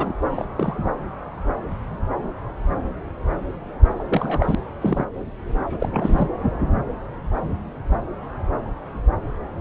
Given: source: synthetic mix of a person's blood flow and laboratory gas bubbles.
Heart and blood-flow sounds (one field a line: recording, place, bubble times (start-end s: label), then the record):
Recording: Doppler ultrasound of blood flow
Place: subclavian vein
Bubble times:
0.00-0.12 s: bubbles
0.31-0.45 s: bubbles
0.56-0.90 s: bubbles
4.00-4.03 s: bubbles
4.08-4.55 s: bubbles
4.81-5.06 s: bubbles
5.79-6.28 s: bubbles
From the record:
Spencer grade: 2 (many but less than half of the cardiac periods contain bubble signals, singularly or in groups)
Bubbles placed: anywhere in the cardiac cycle